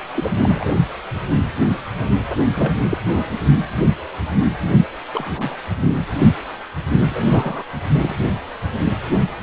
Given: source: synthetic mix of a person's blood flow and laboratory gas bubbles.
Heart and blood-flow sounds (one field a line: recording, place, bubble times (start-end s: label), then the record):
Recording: Doppler ultrasound of blood flow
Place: precordium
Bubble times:
0.14-0.38 s: bubbles
0.40-0.77 s: bubbles
2.53-2.73 s: bubbles
2.90-2.97 s: bubbles
3.05-3.27 s: bubbles
5.13-5.58 s: bubbles
7.04-7.63 s: bubbles
8.02-8.15 s: bubbles
From the record:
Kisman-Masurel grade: 232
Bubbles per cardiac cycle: several, 3 to 8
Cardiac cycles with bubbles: 50 to 99%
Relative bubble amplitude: moderate (0.250 to 0.450)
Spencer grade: 3 (all of the cardiac periods contain showers or single bubble signals, but not dominating or overriding the cardiac motion signals)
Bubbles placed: only in the low amplitude regions of the cardiac cycle